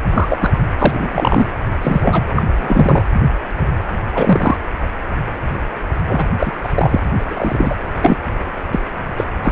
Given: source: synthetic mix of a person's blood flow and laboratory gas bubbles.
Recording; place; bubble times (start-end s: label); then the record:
Doppler ultrasound of blood flow; precordium
0.12-0.61 s: bubbles
0.78-1.09 s: bubbles
1.12-1.47 s: bubbles
1.81-2.23 s: bubbles
2.35-2.44 s: bubbles
2.58-3.02 s: bubbles
4.12-4.56 s: bubbles
6.08-6.26 s: bubbles
6.39-6.52 s: bubbles
6.62-7.00 s: bubbles
7.18-7.24 s: bubbles
7.27-7.76 s: bubbles
8.01-8.17 s: bubbles
8.72-8.79 s: bubbles
9.17-9.24 s: bubbles
9.43-9.52 s: bubbles
From the record:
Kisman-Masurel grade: 233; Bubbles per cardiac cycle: several, 3 to 8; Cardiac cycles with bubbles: 50 to 99%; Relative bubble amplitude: loud (0.450 to 0.775); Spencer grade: 3 (all of the cardiac periods contain showers or single bubble signals, but not dominating or overriding the cardiac motion signals); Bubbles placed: anywhere in the cardiac cycle